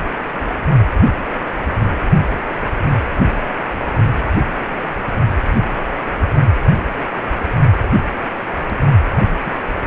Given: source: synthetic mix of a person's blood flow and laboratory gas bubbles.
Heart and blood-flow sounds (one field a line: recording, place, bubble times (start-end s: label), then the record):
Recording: Doppler ultrasound of blood flow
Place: precordium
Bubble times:
9.44-9.56 s: bubbles
9.73-9.80 s: bubbles
From the record:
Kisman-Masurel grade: 211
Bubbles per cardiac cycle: several, 3 to 8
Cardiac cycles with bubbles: 1 to 10%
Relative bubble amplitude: barely perceptible (0.100 to 0.250)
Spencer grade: 1 (occasional bubble signal discernible with the cardiac motion signal, with majority of cardiac periods free of bubbles)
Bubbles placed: only in the low amplitude regions of the cardiac cycle